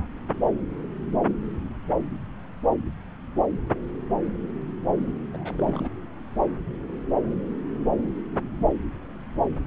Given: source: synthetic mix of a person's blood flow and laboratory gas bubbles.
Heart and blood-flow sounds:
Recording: Doppler ultrasound of blood flow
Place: subclavian vein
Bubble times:
4.98-5.04 s: bubbles
5.33-5.89 s: bubbles
From the record:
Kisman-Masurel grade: 221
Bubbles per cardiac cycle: several, 3 to 8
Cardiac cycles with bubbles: 10 to 50%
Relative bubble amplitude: barely perceptible (0.100 to 0.250)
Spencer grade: 2 (many but less than half of the cardiac periods contain bubble signals, singularly or in groups)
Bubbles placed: anywhere in the cardiac cycle

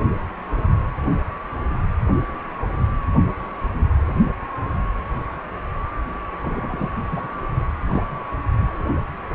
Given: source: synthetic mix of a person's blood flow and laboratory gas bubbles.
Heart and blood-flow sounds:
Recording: Doppler ultrasound of blood flow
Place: precordium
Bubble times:
6.42-6.88 s: bubbles
7.12-7.27 s: bubbles
7.88-8.04 s: bubbles
From the record:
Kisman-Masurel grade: 221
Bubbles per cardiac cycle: several, 3 to 8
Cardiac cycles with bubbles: 10 to 50%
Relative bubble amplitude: barely perceptible (0.100 to 0.250)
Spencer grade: 2 (many but less than half of the cardiac periods contain bubble signals, singularly or in groups)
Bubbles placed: anywhere in the cardiac cycle

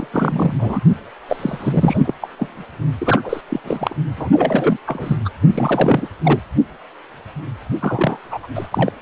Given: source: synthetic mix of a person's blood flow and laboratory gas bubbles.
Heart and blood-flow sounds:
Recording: Doppler ultrasound of blood flow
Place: precordium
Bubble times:
0.00-0.07 s: bubbles
0.11-0.80 s: bubbles
1.28-2.14 s: bubbles
2.21-2.29 s: bubbles
2.38-2.65 s: bubbles
2.98-3.41 s: bubbles
3.48-3.60 s: bubbles
3.64-3.96 s: bubbles
4.17-4.29 s: bubbles
4.32-4.77 s: bubbles
4.87-5.17 s: bubbles
5.25-5.29 s: bubbles
5.54-6.08 s: bubbles
6.24-6.40 s: bubbles
7.80-8.18 s: bubbles
8.26-8.46 s: bubbles
8.55-8.68 s: bubbles
8.71-8.93 s: bubbles
From the record:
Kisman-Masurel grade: 332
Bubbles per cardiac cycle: rolling drumbeat, 9 or more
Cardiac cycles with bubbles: 50 to 99%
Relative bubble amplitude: moderate (0.250 to 0.450)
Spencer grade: 3 (all of the cardiac periods contain showers or single bubble signals, but not dominating or overriding the cardiac motion signals)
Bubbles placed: only in the low amplitude regions of the cardiac cycle

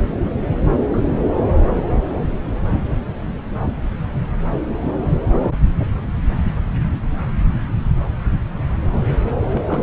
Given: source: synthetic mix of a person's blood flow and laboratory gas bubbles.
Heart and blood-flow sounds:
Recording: Doppler ultrasound of blood flow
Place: subclavian vein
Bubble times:
0.78-0.84 s: bubbles
0.93-1.02 s: bubbles
9.51-9.83 s: bubbles
From the record:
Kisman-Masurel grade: 121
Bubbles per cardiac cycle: 1 to 2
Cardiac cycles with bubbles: 10 to 50%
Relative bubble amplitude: barely perceptible (0.100 to 0.250)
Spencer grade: 2 (many but less than half of the cardiac periods contain bubble signals, singularly or in groups)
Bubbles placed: anywhere in the cardiac cycle

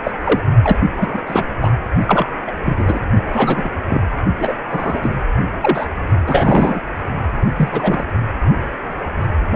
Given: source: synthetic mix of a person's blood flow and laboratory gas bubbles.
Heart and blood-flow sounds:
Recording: Doppler ultrasound of blood flow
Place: precordium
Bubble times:
0.04-0.11 s: bubbles
0.25-0.41 s: bubbles
0.62-0.78 s: bubbles
0.97-1.23 s: bubbles
1.27-1.45 s: bubbles
1.61-1.73 s: bubbles
2.06-2.26 s: bubbles
2.47-2.52 s: bubbles
2.63-3.00 s: bubbles
3.33-3.70 s: bubbles
3.87-4.02 s: bubbles
4.37-4.54 s: bubbles
4.71-4.99 s: bubbles
5.02-5.10 s: bubbles
5.62-5.86 s: bubbles
6.26-6.80 s: bubbles
7.56-8.13 s: bubbles
9.52-9.56 s: bubbles
From the record:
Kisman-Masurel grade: 243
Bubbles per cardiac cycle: several, 3 to 8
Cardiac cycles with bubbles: 100%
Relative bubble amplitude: loud (0.450 to 0.775)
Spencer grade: 3 (all of the cardiac periods contain showers or single bubble signals, but not dominating or overriding the cardiac motion signals)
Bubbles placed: only in the low amplitude regions of the cardiac cycle

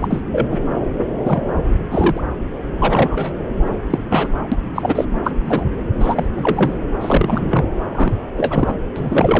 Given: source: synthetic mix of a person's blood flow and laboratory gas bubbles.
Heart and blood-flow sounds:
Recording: Doppler ultrasound of blood flow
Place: subclavian vein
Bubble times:
0.00-0.23 s: bubbles
0.32-0.48 s: bubbles
0.50-0.58 s: bubbles
1.25-1.43 s: bubbles
1.91-2.21 s: bubbles
2.78-3.33 s: bubbles
3.90-3.98 s: bubbles
4.10-4.28 s: bubbles
4.51-4.56 s: bubbles
4.75-5.05 s: bubbles
5.23-5.32 s: bubbles
5.44-5.65 s: bubbles
6.00-6.25 s: bubbles
6.36-6.79 s: bubbles
7.01-7.65 s: bubbles
7.95-8.13 s: bubbles
8.36-8.74 s: bubbles
8.96-9.39 s: bubbles
From the record:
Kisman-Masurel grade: 233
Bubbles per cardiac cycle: several, 3 to 8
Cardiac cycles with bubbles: 50 to 99%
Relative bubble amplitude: loud (0.450 to 0.775)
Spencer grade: 3 (all of the cardiac periods contain showers or single bubble signals, but not dominating or overriding the cardiac motion signals)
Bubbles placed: anywhere in the cardiac cycle

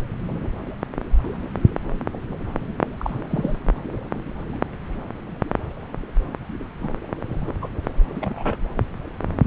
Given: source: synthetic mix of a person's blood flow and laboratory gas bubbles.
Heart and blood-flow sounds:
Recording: Doppler ultrasound of blood flow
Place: subclavian vein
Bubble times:
2.98-3.18 s: bubbles
3.29-3.58 s: bubbles
6.83-6.89 s: bubbles
7.47-7.54 s: bubbles
7.62-7.68 s: bubbles
8.20-8.57 s: bubbles
From the record:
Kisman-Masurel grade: 122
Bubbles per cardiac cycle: 1 to 2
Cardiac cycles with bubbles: 10 to 50%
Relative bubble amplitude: moderate (0.250 to 0.450)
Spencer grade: 2 (many but less than half of the cardiac periods contain bubble signals, singularly or in groups)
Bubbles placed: anywhere in the cardiac cycle

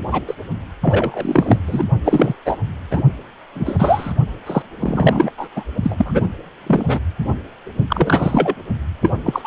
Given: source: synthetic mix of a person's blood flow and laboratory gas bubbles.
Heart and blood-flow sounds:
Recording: Doppler ultrasound of blood flow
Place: precordium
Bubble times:
0.11-0.23 s: bubbles
0.27-0.35 s: bubbles
0.82-1.57 s: bubbles
1.67-1.85 s: bubbles
2.04-2.33 s: bubbles
2.45-2.56 s: bubbles
2.90-3.02 s: bubbles
3.55-4.14 s: bubbles
4.46-4.62 s: bubbles
4.80-5.31 s: bubbles
5.38-5.48 s: bubbles
5.56-5.64 s: bubbles
5.83-6.25 s: bubbles
6.67-7.00 s: bubbles
7.24-7.33 s: bubbles
7.89-8.54 s: bubbles
9.03-9.12 s: bubbles
9.23-9.47 s: bubbles
From the record:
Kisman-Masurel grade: 243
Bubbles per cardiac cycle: several, 3 to 8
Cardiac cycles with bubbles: 100%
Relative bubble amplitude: loud (0.450 to 0.775)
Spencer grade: 3 (all of the cardiac periods contain showers or single bubble signals, but not dominating or overriding the cardiac motion signals)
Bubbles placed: only in the low amplitude regions of the cardiac cycle

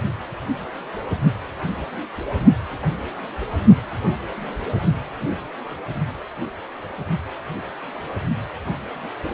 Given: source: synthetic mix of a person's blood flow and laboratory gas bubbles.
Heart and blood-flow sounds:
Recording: Doppler ultrasound of blood flow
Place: precordium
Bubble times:
no bubbles
From the record:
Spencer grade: 0 (complete lack of bubble signals)

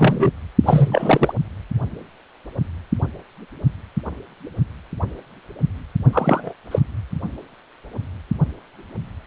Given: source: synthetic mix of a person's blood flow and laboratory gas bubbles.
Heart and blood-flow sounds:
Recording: Doppler ultrasound of blood flow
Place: precordium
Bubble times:
0.00-0.31 s: bubbles
0.64-1.33 s: bubbles
6.12-6.54 s: bubbles
6.71-6.79 s: bubbles
From the record:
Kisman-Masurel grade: 233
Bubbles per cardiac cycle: several, 3 to 8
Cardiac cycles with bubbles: 50 to 99%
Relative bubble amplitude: loud (0.450 to 0.775)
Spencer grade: 3 (all of the cardiac periods contain showers or single bubble signals, but not dominating or overriding the cardiac motion signals)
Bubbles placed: only in the low amplitude regions of the cardiac cycle

